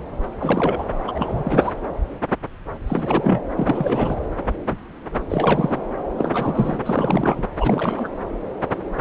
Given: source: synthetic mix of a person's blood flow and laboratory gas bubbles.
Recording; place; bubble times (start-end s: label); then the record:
Doppler ultrasound of blood flow; subclavian vein
0.40-0.84 s: bubbles
1.07-1.71 s: bubbles
2.87-3.42 s: bubbles
3.56-4.15 s: bubbles
5.29-5.81 s: bubbles
6.17-6.79 s: bubbles
6.85-7.46 s: bubbles
7.58-8.09 s: bubbles
From the record:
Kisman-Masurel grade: 332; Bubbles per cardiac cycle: rolling drumbeat, 9 or more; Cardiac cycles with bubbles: 50 to 99%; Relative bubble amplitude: moderate (0.250 to 0.450); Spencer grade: 3 (all of the cardiac periods contain showers or single bubble signals, but not dominating or overriding the cardiac motion signals); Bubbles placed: anywhere in the cardiac cycle